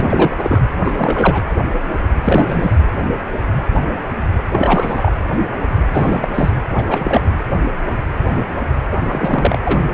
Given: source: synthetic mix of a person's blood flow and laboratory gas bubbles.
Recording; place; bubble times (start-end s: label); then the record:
Doppler ultrasound of blood flow; precordium
0.00-0.60 s: bubbles
0.84-1.42 s: bubbles
2.23-2.76 s: bubbles
4.53-5.12 s: bubbles
5.93-6.32 s: bubbles
6.34-6.50 s: bubbles
6.78-6.83 s: bubbles
6.86-7.21 s: bubbles
8.92-8.98 s: bubbles
9.04-9.58 s: bubbles
9.64-9.94 s: bubbles
From the record:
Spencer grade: 3 (all of the cardiac periods contain showers or single bubble signals, but not dominating or overriding the cardiac motion signals); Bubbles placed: anywhere in the cardiac cycle